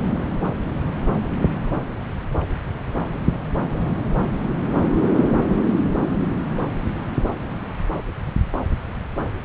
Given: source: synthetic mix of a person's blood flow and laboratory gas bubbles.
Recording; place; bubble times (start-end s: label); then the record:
Doppler ultrasound of blood flow; subclavian vein
no bubbles
From the record:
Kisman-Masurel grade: 000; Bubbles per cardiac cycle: 0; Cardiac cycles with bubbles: 0%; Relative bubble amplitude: no bubbles discernible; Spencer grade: 0 (complete lack of bubble signals)